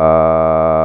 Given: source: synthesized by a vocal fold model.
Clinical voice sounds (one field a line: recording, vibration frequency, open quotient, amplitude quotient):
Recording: sustained vowel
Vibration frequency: 80 Hz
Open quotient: 0.3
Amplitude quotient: 1.4